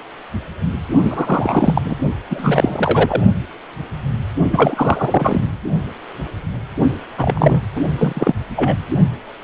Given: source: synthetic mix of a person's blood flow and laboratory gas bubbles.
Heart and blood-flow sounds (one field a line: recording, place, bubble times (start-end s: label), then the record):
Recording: Doppler ultrasound of blood flow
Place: precordium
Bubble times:
1.02-1.81 s: bubbles
1.85-1.94 s: bubbles
2.29-3.21 s: bubbles
4.52-5.44 s: bubbles
7.17-7.62 s: bubbles
7.75-7.82 s: bubbles
7.97-8.33 s: bubbles
8.55-8.77 s: bubbles
From the record:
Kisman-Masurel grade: 333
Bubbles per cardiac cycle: rolling drumbeat, 9 or more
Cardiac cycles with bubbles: 50 to 99%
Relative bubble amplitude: loud (0.450 to 0.775)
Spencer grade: 3 (all of the cardiac periods contain showers or single bubble signals, but not dominating or overriding the cardiac motion signals)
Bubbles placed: only in the low amplitude regions of the cardiac cycle